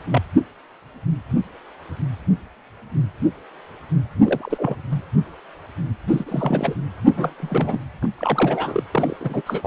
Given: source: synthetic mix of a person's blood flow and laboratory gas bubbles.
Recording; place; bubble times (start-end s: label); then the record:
Doppler ultrasound of blood flow; precordium
0.11-0.22 s: bubbles
4.23-4.76 s: bubbles
4.90-5.07 s: bubbles
6.08-6.79 s: bubbles
7.08-7.33 s: bubbles
7.40-7.79 s: bubbles
8.01-8.09 s: bubbles
8.17-8.83 s: bubbles
8.94-9.16 s: bubbles
9.20-9.42 s: bubbles
9.46-9.67 s: bubbles
From the record:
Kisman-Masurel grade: 232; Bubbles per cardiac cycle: several, 3 to 8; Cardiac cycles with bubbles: 50 to 99%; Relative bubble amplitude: moderate (0.250 to 0.450); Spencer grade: 3 (all of the cardiac periods contain showers or single bubble signals, but not dominating or overriding the cardiac motion signals); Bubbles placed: anywhere in the cardiac cycle